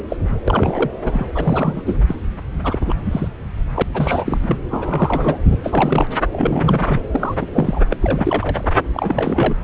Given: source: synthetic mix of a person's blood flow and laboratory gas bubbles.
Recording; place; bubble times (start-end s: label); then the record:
Doppler ultrasound of blood flow; subclavian vein
0.09-0.17 s: bubbles
0.47-0.91 s: bubbles
1.01-1.27 s: bubbles
1.35-1.82 s: bubbles
1.84-1.98 s: bubbles
2.06-2.15 s: bubbles
2.63-2.94 s: bubbles
3.05-3.28 s: bubbles
3.74-3.83 s: bubbles
3.94-4.58 s: bubbles
4.71-5.41 s: bubbles
5.51-5.57 s: bubbles
5.63-6.07 s: bubbles
6.32-7.01 s: bubbles
7.09-7.35 s: bubbles
7.41-7.46 s: bubbles
7.53-7.80 s: bubbles
7.91-7.96 s: bubbles
8.02-8.70 s: bubbles
8.93-9.56 s: bubbles
From the record:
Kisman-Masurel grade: 342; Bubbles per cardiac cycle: rolling drumbeat, 9 or more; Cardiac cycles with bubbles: 100%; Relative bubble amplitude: moderate (0.250 to 0.450); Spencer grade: 3 (all of the cardiac periods contain showers or single bubble signals, but not dominating or overriding the cardiac motion signals); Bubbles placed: anywhere in the cardiac cycle